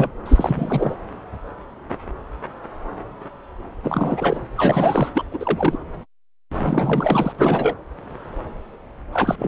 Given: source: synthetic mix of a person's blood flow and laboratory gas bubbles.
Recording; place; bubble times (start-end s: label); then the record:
Doppler ultrasound of blood flow; subclavian vein
0.00-0.11 s: bubbles
0.24-0.95 s: bubbles
3.83-4.39 s: bubbles
4.56-5.09 s: bubbles
5.14-5.22 s: bubbles
5.31-5.76 s: bubbles
6.59-7.35 s: bubbles
7.38-7.74 s: bubbles
9.12-9.36 s: bubbles
9.38-9.48 s: bubbles
From the record:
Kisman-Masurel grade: 332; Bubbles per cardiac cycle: rolling drumbeat, 9 or more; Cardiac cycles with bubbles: 50 to 99%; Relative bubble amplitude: moderate (0.250 to 0.450); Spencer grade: 3 (all of the cardiac periods contain showers or single bubble signals, but not dominating or overriding the cardiac motion signals); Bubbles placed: anywhere in the cardiac cycle